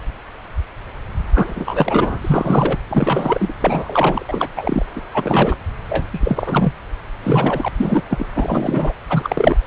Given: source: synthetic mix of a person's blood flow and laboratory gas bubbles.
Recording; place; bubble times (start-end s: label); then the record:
Doppler ultrasound of blood flow; subclavian vein
1.34-2.19 s: bubbles
2.21-2.77 s: bubbles
2.89-3.54 s: bubbles
3.60-4.26 s: bubbles
4.29-4.49 s: bubbles
4.55-4.85 s: bubbles
4.95-5.01 s: bubbles
5.14-5.56 s: bubbles
5.88-6.06 s: bubbles
6.13-6.73 s: bubbles
7.22-7.68 s: bubbles
7.77-8.03 s: bubbles
8.10-8.26 s: bubbles
8.35-8.93 s: bubbles
9.09-9.57 s: bubbles
From the record:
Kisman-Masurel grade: 333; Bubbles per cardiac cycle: rolling drumbeat, 9 or more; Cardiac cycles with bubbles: 50 to 99%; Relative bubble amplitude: loud (0.450 to 0.775); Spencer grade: 3 (all of the cardiac periods contain showers or single bubble signals, but not dominating or overriding the cardiac motion signals); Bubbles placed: anywhere in the cardiac cycle